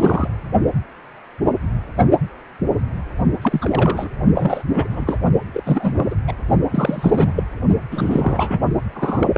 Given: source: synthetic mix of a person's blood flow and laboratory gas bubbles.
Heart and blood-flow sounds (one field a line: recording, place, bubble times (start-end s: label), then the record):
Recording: Doppler ultrasound of blood flow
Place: precordium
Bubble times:
0.00-0.28 s: bubbles
3.42-4.08 s: bubbles
4.34-4.88 s: bubbles
4.91-5.17 s: bubbles
5.54-5.62 s: bubbles
5.66-5.95 s: bubbles
5.97-6.06 s: bubbles
6.11-6.15 s: bubbles
6.27-6.34 s: bubbles
6.71-7.32 s: bubbles
7.36-7.44 s: bubbles
7.91-8.59 s: bubbles
8.95-9.30 s: bubbles
9.34-9.38 s: bubbles
From the record:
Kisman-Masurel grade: 332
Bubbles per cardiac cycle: rolling drumbeat, 9 or more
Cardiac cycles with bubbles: 50 to 99%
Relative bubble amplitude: moderate (0.250 to 0.450)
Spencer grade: 3 (all of the cardiac periods contain showers or single bubble signals, but not dominating or overriding the cardiac motion signals)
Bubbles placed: only in the low amplitude regions of the cardiac cycle